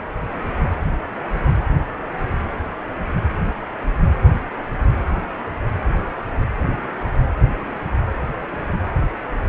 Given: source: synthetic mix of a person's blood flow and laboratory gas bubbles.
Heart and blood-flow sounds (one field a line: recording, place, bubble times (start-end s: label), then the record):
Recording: Doppler ultrasound of blood flow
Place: precordium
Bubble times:
no bubbles
From the record:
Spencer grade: 0 (complete lack of bubble signals)